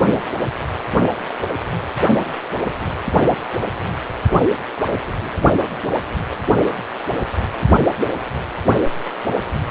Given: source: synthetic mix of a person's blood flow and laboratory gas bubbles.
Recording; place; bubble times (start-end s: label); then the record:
Doppler ultrasound of blood flow; precordium
no bubbles
From the record:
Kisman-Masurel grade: 000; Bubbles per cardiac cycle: 0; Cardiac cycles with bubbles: 0%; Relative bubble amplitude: no bubbles discernible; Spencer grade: 0 (complete lack of bubble signals)